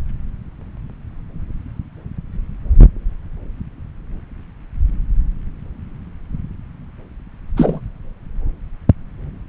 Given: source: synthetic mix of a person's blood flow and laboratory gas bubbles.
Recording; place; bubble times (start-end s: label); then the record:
Doppler ultrasound of blood flow; subclavian vein
7.57-7.80 s: bubbles
From the record:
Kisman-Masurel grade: 113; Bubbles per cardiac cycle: 1 to 2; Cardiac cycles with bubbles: 1 to 10%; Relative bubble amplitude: loud (0.450 to 0.775); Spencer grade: 1 (occasional bubble signal discernible with the cardiac motion signal, with majority of cardiac periods free of bubbles); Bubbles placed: anywhere in the cardiac cycle